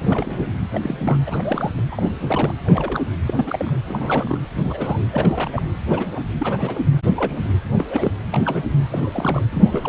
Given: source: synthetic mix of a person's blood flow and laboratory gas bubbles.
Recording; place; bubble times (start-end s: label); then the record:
Doppler ultrasound of blood flow; precordium
0.00-0.47 s: bubbles
0.72-0.80 s: bubbles
0.82-1.17 s: bubbles
1.26-1.72 s: bubbles
1.77-1.81 s: bubbles
1.92-2.54 s: bubbles
2.64-3.02 s: bubbles
3.27-3.34 s: bubbles
3.36-3.79 s: bubbles
3.86-4.38 s: bubbles
4.56-5.00 s: bubbles
5.10-5.62 s: bubbles
5.86-6.21 s: bubbles
6.40-6.81 s: bubbles
7.14-7.50 s: bubbles
7.76-7.87 s: bubbles
7.90-8.12 s: bubbles
8.31-8.63 s: bubbles
8.90-9.45 s: bubbles
9.51-9.89 s: bubbles
From the record:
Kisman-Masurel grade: 242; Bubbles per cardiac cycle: several, 3 to 8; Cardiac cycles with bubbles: 100%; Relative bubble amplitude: moderate (0.250 to 0.450); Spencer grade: 3 (all of the cardiac periods contain showers or single bubble signals, but not dominating or overriding the cardiac motion signals); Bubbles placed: anywhere in the cardiac cycle